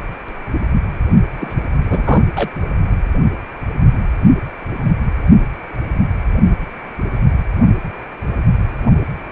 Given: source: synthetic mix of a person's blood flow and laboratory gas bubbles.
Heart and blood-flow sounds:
Doppler ultrasound of blood flow; precordium
1.40-1.55 s: bubbles
1.82-2.27 s: bubbles
2.35-2.50 s: bubbles
From the record:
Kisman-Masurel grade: 222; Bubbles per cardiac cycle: several, 3 to 8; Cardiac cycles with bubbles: 10 to 50%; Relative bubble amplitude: moderate (0.250 to 0.450); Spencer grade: 2 (many but less than half of the cardiac periods contain bubble signals, singularly or in groups); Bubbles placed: only in the low amplitude regions of the cardiac cycle

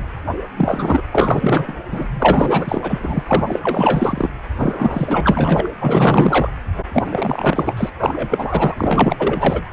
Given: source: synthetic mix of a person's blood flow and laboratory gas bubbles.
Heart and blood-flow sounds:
Doppler ultrasound of blood flow; precordium
0.00-0.03 s: bubbles
0.57-1.02 s: bubbles
1.11-1.73 s: bubbles
1.91-2.08 s: bubbles
2.19-3.23 s: bubbles
3.26-3.60 s: bubbles
3.63-4.29 s: bubbles
4.57-5.69 s: bubbles
5.79-6.50 s: bubbles
6.93-7.90 s: bubbles
8.00-8.74 s: bubbles
8.79-9.62 s: bubbles
From the record:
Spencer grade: 4 (maximum detectable bubble signal sounding continuously throughout systole and diastole of every cardiac period, and overriding the amplitude of the normal cardiac signals); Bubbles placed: anywhere in the cardiac cycle

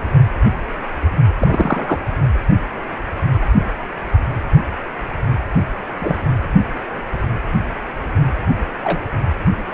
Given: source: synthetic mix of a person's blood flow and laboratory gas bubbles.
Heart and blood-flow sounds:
Doppler ultrasound of blood flow; precordium
1.39-1.99 s: bubbles
6.00-6.17 s: bubbles
8.83-9.00 s: bubbles
From the record:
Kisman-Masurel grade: 123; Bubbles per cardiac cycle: 1 to 2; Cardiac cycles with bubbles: 10 to 50%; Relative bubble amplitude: loud (0.450 to 0.775); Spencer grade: 2 (many but less than half of the cardiac periods contain bubble signals, singularly or in groups); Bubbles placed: anywhere in the cardiac cycle

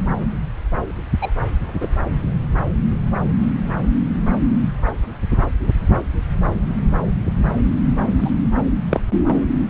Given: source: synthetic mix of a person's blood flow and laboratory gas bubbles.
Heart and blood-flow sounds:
Doppler ultrasound of blood flow; subclavian vein
1.21-1.31 s: bubbles
1.80-1.89 s: bubbles
8.21-8.30 s: bubbles
8.90-9.00 s: bubbles
From the record:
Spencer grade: 2 (many but less than half of the cardiac periods contain bubble signals, singularly or in groups); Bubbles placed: anywhere in the cardiac cycle

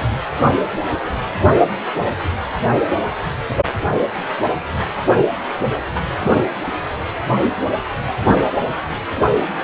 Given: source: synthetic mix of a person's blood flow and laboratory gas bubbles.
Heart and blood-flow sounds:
Doppler ultrasound of blood flow; precordium
6.20-6.43 s: bubbles
From the record:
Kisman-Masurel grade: 112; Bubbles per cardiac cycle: 1 to 2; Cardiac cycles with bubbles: 1 to 10%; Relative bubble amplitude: moderate (0.250 to 0.450); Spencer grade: 1 (occasional bubble signal discernible with the cardiac motion signal, with majority of cardiac periods free of bubbles); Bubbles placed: anywhere in the cardiac cycle

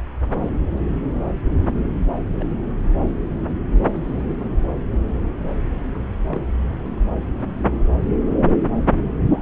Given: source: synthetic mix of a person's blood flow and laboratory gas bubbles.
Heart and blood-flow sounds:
Doppler ultrasound of blood flow; subclavian vein
2.40-2.46 s: bubbles
2.50-2.54 s: bubbles
3.73-4.23 s: bubbles
5.94-5.97 s: bubbles
6.26-6.41 s: bubbles
9.30-9.42 s: bubbles
From the record:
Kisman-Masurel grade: 121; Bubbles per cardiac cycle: 1 to 2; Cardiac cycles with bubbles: 10 to 50%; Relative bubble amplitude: barely perceptible (0.100 to 0.250); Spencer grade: 2 (many but less than half of the cardiac periods contain bubble signals, singularly or in groups); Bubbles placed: anywhere in the cardiac cycle

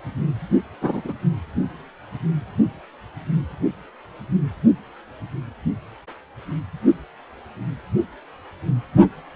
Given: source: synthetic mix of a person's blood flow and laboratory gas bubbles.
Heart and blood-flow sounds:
Doppler ultrasound of blood flow; precordium
0.81-1.02 s: bubbles
1.04-1.13 s: bubbles
From the record:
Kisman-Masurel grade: 113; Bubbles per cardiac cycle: 1 to 2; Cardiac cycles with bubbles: 1 to 10%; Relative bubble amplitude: loud (0.450 to 0.775); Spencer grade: 1 (occasional bubble signal discernible with the cardiac motion signal, with majority of cardiac periods free of bubbles); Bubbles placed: only in the low amplitude regions of the cardiac cycle

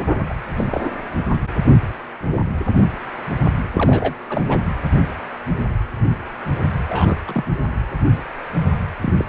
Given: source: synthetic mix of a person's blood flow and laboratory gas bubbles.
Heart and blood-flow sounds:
Doppler ultrasound of blood flow; precordium
0.28-0.34 s: bubbles
0.57-0.65 s: bubbles
0.71-0.90 s: bubbles
3.72-4.14 s: bubbles
4.29-4.41 s: bubbles
4.49-4.63 s: bubbles
6.89-7.17 s: bubbles
7.27-7.43 s: bubbles
9.02-9.14 s: bubbles
9.18-9.25 s: bubbles
From the record:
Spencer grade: 2 (many but less than half of the cardiac periods contain bubble signals, singularly or in groups); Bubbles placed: anywhere in the cardiac cycle

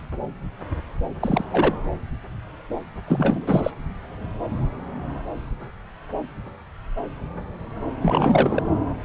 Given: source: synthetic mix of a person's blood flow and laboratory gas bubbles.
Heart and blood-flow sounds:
Doppler ultrasound of blood flow; subclavian vein
1.20-1.44 s: bubbles
1.51-1.74 s: bubbles
3.05-3.71 s: bubbles
8.02-8.62 s: bubbles
From the record:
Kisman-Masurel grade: 222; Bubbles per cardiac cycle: several, 3 to 8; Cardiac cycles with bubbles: 10 to 50%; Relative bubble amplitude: moderate (0.250 to 0.450); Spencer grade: 2 (many but less than half of the cardiac periods contain bubble signals, singularly or in groups); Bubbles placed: anywhere in the cardiac cycle

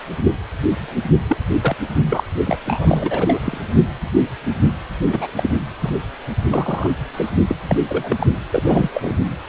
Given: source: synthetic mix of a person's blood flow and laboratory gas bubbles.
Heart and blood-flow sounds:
Doppler ultrasound of blood flow; precordium
1.27-1.38 s: bubbles
1.61-1.76 s: bubbles
2.09-2.23 s: bubbles
2.46-2.58 s: bubbles
2.65-3.40 s: bubbles
3.44-3.58 s: bubbles
5.12-5.28 s: bubbles
5.35-5.50 s: bubbles
5.81-5.97 s: bubbles
6.46-6.91 s: bubbles
7.13-7.30 s: bubbles
7.48-7.57 s: bubbles
7.68-7.78 s: bubbles
7.88-8.27 s: bubbles
8.52-8.90 s: bubbles
8.94-9.16 s: bubbles
From the record:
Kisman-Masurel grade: 233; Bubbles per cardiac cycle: several, 3 to 8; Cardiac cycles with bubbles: 50 to 99%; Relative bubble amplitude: loud (0.450 to 0.775); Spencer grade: 3 (all of the cardiac periods contain showers or single bubble signals, but not dominating or overriding the cardiac motion signals); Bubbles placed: anywhere in the cardiac cycle

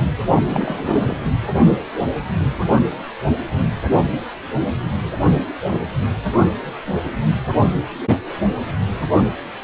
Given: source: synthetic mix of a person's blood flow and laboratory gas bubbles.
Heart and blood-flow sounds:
Doppler ultrasound of blood flow; precordium
0.34-0.42 s: bubbles
0.49-1.17 s: bubbles
From the record:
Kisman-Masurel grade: 212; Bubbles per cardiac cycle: several, 3 to 8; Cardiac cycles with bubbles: 1 to 10%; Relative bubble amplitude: moderate (0.250 to 0.450); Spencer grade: 1 (occasional bubble signal discernible with the cardiac motion signal, with majority of cardiac periods free of bubbles); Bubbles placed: anywhere in the cardiac cycle

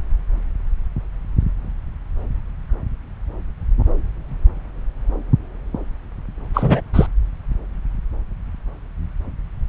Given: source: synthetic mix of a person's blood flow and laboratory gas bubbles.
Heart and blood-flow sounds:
Doppler ultrasound of blood flow; subclavian vein
6.54-6.81 s: bubbles
6.93-7.07 s: bubbles
From the record:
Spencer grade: 1 (occasional bubble signal discernible with the cardiac motion signal, with majority of cardiac periods free of bubbles); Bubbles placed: anywhere in the cardiac cycle

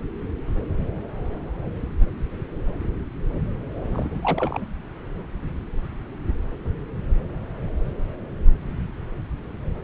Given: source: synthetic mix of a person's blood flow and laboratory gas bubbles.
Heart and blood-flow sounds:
Doppler ultrasound of blood flow; subclavian vein
3.81-4.65 s: bubbles
From the record:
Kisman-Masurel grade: 211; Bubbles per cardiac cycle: several, 3 to 8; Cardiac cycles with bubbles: 1 to 10%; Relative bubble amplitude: barely perceptible (0.100 to 0.250); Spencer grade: 1 (occasional bubble signal discernible with the cardiac motion signal, with majority of cardiac periods free of bubbles); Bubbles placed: anywhere in the cardiac cycle

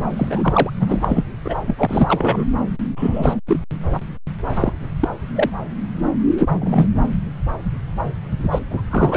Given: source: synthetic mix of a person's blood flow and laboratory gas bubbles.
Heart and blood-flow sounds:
Doppler ultrasound of blood flow; subclavian vein
0.16-0.70 s: bubbles
0.80-1.25 s: bubbles
1.45-1.56 s: bubbles
1.62-1.75 s: bubbles
1.78-2.44 s: bubbles
2.96-3.35 s: bubbles
3.47-3.60 s: bubbles
4.54-4.72 s: bubbles
5.00-5.08 s: bubbles
5.35-5.50 s: bubbles
6.39-6.47 s: bubbles
6.60-6.87 s: bubbles
8.39-8.49 s: bubbles
8.52-8.60 s: bubbles
8.70-8.81 s: bubbles
8.91-9.17 s: bubbles
From the record:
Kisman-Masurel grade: 233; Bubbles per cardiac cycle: several, 3 to 8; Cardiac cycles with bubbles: 50 to 99%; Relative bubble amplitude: loud (0.450 to 0.775); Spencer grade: 3 (all of the cardiac periods contain showers or single bubble signals, but not dominating or overriding the cardiac motion signals); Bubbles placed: anywhere in the cardiac cycle

